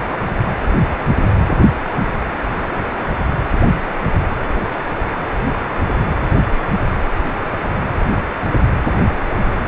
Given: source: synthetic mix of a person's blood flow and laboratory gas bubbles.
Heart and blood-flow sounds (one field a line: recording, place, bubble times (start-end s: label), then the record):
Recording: Doppler ultrasound of blood flow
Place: precordium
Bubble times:
no bubbles
From the record:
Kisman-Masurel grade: 000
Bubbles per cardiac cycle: 0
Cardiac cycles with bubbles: 0%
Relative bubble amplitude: no bubbles discernible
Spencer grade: 0 (complete lack of bubble signals)